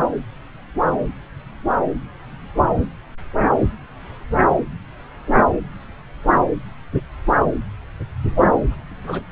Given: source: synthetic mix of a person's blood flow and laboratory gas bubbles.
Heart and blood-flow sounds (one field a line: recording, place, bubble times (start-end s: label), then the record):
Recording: Doppler ultrasound of blood flow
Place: subclavian vein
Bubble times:
9.03-9.23 s: bubbles
From the record:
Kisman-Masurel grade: 112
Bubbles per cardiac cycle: 1 to 2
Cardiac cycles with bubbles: 1 to 10%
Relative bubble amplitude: moderate (0.250 to 0.450)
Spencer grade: 1 (occasional bubble signal discernible with the cardiac motion signal, with majority of cardiac periods free of bubbles)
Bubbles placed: anywhere in the cardiac cycle